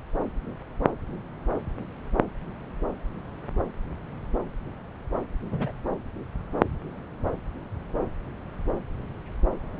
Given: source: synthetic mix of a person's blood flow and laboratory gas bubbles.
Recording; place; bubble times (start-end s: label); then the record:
Doppler ultrasound of blood flow; subclavian vein
5.50-5.84 s: bubbles
From the record:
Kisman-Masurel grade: 111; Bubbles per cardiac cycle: 1 to 2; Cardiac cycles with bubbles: 1 to 10%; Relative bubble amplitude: barely perceptible (0.100 to 0.250); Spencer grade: 1 (occasional bubble signal discernible with the cardiac motion signal, with majority of cardiac periods free of bubbles); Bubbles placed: anywhere in the cardiac cycle